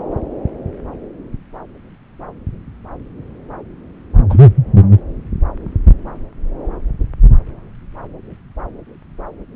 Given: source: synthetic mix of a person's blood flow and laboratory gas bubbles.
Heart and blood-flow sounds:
Doppler ultrasound of blood flow; subclavian vein
4.29-4.39 s: bubbles
From the record:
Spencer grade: 1 (occasional bubble signal discernible with the cardiac motion signal, with majority of cardiac periods free of bubbles); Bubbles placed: anywhere in the cardiac cycle

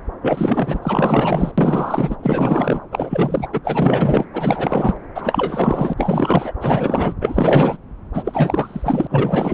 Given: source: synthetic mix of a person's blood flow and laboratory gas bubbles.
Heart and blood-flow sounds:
Doppler ultrasound of blood flow; subclavian vein
0.21-1.52 s: bubbles
1.58-2.17 s: bubbles
2.23-2.81 s: bubbles
2.91-3.48 s: bubbles
3.53-3.60 s: bubbles
3.63-4.25 s: bubbles
4.33-4.96 s: bubbles
5.15-5.93 s: bubbles
5.97-6.53 s: bubbles
6.61-7.13 s: bubbles
7.21-7.77 s: bubbles
8.13-9.54 s: bubbles
From the record:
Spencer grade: 4 (maximum detectable bubble signal sounding continuously throughout systole and diastole of every cardiac period, and overriding the amplitude of the normal cardiac signals); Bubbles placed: anywhere in the cardiac cycle

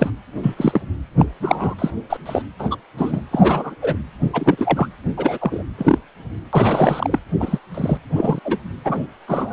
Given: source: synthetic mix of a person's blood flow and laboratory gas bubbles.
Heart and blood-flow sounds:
Doppler ultrasound of blood flow; precordium
0.00-0.10 s: bubbles
0.43-0.82 s: bubbles
1.19-1.25 s: bubbles
1.40-1.74 s: bubbles
1.79-1.91 s: bubbles
2.09-2.17 s: bubbles
2.25-2.42 s: bubbles
2.59-2.77 s: bubbles
2.97-3.21 s: bubbles
3.31-3.75 s: bubbles
3.82-3.97 s: bubbles
4.33-4.88 s: bubbles
5.17-5.38 s: bubbles
5.41-5.62 s: bubbles
5.78-5.99 s: bubbles
6.53-7.19 s: bubbles
7.40-7.59 s: bubbles
7.74-7.98 s: bubbles
8.15-8.39 s: bubbles
8.44-8.58 s: bubbles
8.84-9.01 s: bubbles
9.27-9.53 s: bubbles
From the record:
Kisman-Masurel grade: 243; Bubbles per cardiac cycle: several, 3 to 8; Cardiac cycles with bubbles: 100%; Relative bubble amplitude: loud (0.450 to 0.775); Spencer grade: 3 (all of the cardiac periods contain showers or single bubble signals, but not dominating or overriding the cardiac motion signals); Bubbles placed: anywhere in the cardiac cycle

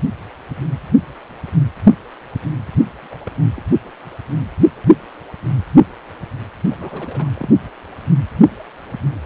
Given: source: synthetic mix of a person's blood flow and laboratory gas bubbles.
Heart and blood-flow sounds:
Doppler ultrasound of blood flow; precordium
3.02-3.32 s: bubbles
3.54-3.62 s: bubbles
6.68-7.28 s: bubbles
7.35-7.49 s: bubbles
From the record:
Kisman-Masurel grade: 221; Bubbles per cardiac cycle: several, 3 to 8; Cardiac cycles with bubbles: 10 to 50%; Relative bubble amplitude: barely perceptible (0.100 to 0.250); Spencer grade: 2 (many but less than half of the cardiac periods contain bubble signals, singularly or in groups); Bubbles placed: only in the low amplitude regions of the cardiac cycle

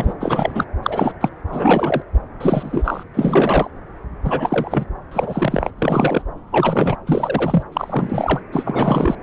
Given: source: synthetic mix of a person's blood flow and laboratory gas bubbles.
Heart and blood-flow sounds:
Doppler ultrasound of blood flow; subclavian vein
0.00-0.13 s: bubbles
0.20-0.65 s: bubbles
0.82-1.14 s: bubbles
1.21-1.29 s: bubbles
1.49-2.02 s: bubbles
2.40-3.03 s: bubbles
3.13-3.70 s: bubbles
4.24-4.85 s: bubbles
5.11-5.71 s: bubbles
5.79-6.22 s: bubbles
6.52-6.96 s: bubbles
7.07-7.63 s: bubbles
7.72-8.41 s: bubbles
8.52-9.16 s: bubbles
From the record:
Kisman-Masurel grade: 333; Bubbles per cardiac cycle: rolling drumbeat, 9 or more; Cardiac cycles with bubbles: 50 to 99%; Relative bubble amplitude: loud (0.450 to 0.775); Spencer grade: 3 (all of the cardiac periods contain showers or single bubble signals, but not dominating or overriding the cardiac motion signals); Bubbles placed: anywhere in the cardiac cycle

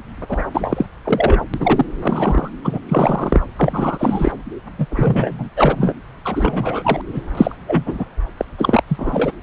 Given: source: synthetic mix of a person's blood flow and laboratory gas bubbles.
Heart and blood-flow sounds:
Doppler ultrasound of blood flow; subclavian vein
0.28-0.43 s: bubbles
0.54-0.86 s: bubbles
1.04-1.41 s: bubbles
1.53-1.85 s: bubbles
2.00-2.51 s: bubbles
2.64-2.80 s: bubbles
2.88-3.40 s: bubbles
3.55-4.31 s: bubbles
4.78-4.87 s: bubbles
4.90-5.49 s: bubbles
5.56-5.96 s: bubbles
6.25-7.01 s: bubbles
7.12-7.22 s: bubbles
7.34-7.55 s: bubbles
7.67-8.04 s: bubbles
8.37-8.45 s: bubbles
8.58-8.83 s: bubbles
8.88-9.31 s: bubbles
From the record:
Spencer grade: 3 (all of the cardiac periods contain showers or single bubble signals, but not dominating or overriding the cardiac motion signals); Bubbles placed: anywhere in the cardiac cycle

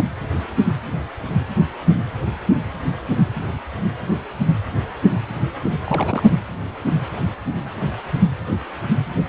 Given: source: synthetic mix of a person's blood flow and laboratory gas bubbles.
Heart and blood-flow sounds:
Doppler ultrasound of blood flow; precordium
0.00-0.02 s: bubbles
5.84-6.32 s: bubbles
From the record:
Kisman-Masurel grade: 212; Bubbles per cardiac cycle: several, 3 to 8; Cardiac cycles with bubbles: 1 to 10%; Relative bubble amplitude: moderate (0.250 to 0.450); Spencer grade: 1 (occasional bubble signal discernible with the cardiac motion signal, with majority of cardiac periods free of bubbles); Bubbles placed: anywhere in the cardiac cycle

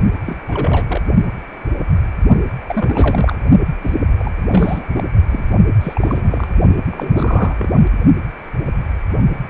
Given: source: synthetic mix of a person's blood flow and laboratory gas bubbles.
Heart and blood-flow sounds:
Doppler ultrasound of blood flow; precordium
0.26-0.40 s: bubbles
0.46-1.01 s: bubbles
2.67-3.35 s: bubbles
3.80-3.98 s: bubbles
4.18-4.32 s: bubbles
4.48-5.04 s: bubbles
5.29-5.43 s: bubbles
5.58-5.66 s: bubbles
5.80-6.50 s: bubbles
6.91-7.55 s: bubbles
7.58-7.72 s: bubbles
From the record:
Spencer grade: 3 (all of the cardiac periods contain showers or single bubble signals, but not dominating or overriding the cardiac motion signals); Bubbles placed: only in the low amplitude regions of the cardiac cycle

